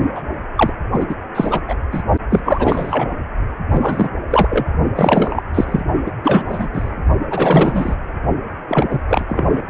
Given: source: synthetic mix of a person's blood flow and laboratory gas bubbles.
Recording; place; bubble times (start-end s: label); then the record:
Doppler ultrasound of blood flow; precordium
0.15-0.22 s: bubbles
0.56-0.73 s: bubbles
0.92-1.16 s: bubbles
1.34-1.60 s: bubbles
1.68-1.75 s: bubbles
1.92-2.02 s: bubbles
2.29-2.41 s: bubbles
2.44-3.12 s: bubbles
3.71-4.08 s: bubbles
4.30-4.63 s: bubbles
4.95-5.43 s: bubbles
5.54-5.84 s: bubbles
6.06-6.12 s: bubbles
6.24-6.44 s: bubbles
6.48-6.68 s: bubbles
6.74-6.93 s: bubbles
7.30-7.95 s: bubbles
8.68-8.99 s: bubbles
9.09-9.62 s: bubbles
From the record:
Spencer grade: 3 (all of the cardiac periods contain showers or single bubble signals, but not dominating or overriding the cardiac motion signals); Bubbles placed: only in the low amplitude regions of the cardiac cycle